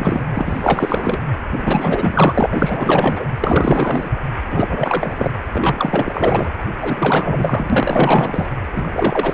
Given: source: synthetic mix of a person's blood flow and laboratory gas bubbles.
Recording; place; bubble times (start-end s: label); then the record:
Doppler ultrasound of blood flow; precordium
0.00-0.24 s: bubbles
0.35-1.21 s: bubbles
1.51-3.25 s: bubbles
3.40-4.10 s: bubbles
4.51-5.31 s: bubbles
5.52-6.51 s: bubbles
6.81-8.46 s: bubbles
8.72-9.34 s: bubbles
From the record:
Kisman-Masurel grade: 444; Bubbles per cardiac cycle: continuous sound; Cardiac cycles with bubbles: 100%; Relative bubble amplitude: maximal (0.775 to 0.999); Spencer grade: 4 (maximum detectable bubble signal sounding continuously throughout systole and diastole of every cardiac period, and overriding the amplitude of the normal cardiac signals); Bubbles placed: anywhere in the cardiac cycle